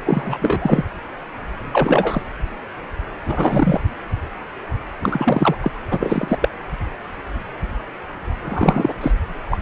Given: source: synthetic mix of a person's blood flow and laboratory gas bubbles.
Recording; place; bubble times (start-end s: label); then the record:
Doppler ultrasound of blood flow; precordium
0.05-0.38 s: bubbles
0.41-0.84 s: bubbles
1.72-2.22 s: bubbles
3.25-3.80 s: bubbles
5.00-5.55 s: bubbles
5.60-5.71 s: bubbles
5.90-6.38 s: bubbles
6.41-6.49 s: bubbles
8.44-8.94 s: bubbles
9.01-9.12 s: bubbles
9.50-9.58 s: bubbles
From the record:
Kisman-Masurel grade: 333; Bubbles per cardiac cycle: rolling drumbeat, 9 or more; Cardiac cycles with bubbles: 50 to 99%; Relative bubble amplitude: loud (0.450 to 0.775); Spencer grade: 3 (all of the cardiac periods contain showers or single bubble signals, but not dominating or overriding the cardiac motion signals); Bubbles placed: anywhere in the cardiac cycle